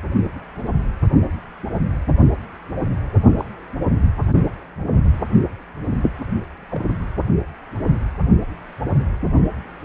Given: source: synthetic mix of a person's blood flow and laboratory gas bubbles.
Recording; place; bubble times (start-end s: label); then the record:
Doppler ultrasound of blood flow; precordium
3.36-3.45 s: bubbles
6.71-6.85 s: bubbles
From the record:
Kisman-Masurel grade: 121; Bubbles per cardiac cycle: 1 to 2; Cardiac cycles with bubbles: 10 to 50%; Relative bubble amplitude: barely perceptible (0.100 to 0.250); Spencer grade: 2 (many but less than half of the cardiac periods contain bubble signals, singularly or in groups); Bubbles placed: only in the low amplitude regions of the cardiac cycle